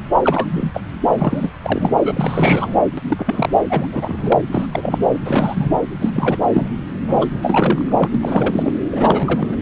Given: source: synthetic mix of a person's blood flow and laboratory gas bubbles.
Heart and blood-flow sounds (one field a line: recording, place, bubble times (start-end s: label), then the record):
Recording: Doppler ultrasound of blood flow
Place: subclavian vein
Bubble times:
0.24-0.48 s: bubbles
0.51-0.81 s: bubbles
1.18-1.51 s: bubbles
1.64-1.98 s: bubbles
2.04-2.82 s: bubbles
2.97-3.00 s: bubbles
3.08-3.64 s: bubbles
3.69-3.86 s: bubbles
3.91-4.39 s: bubbles
4.51-4.66 s: bubbles
4.72-4.98 s: bubbles
5.14-5.18 s: bubbles
5.24-5.70 s: bubbles
6.01-6.10 s: bubbles
6.13-6.38 s: bubbles
6.42-6.68 s: bubbles
7.03-7.26 s: bubbles
7.32-7.92 s: bubbles
7.96-8.08 s: bubbles
8.14-8.72 s: bubbles
8.90-9.56 s: bubbles
From the record:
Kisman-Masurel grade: 342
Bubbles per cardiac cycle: rolling drumbeat, 9 or more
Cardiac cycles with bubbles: 100%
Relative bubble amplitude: moderate (0.250 to 0.450)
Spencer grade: 3 (all of the cardiac periods contain showers or single bubble signals, but not dominating or overriding the cardiac motion signals)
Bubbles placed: anywhere in the cardiac cycle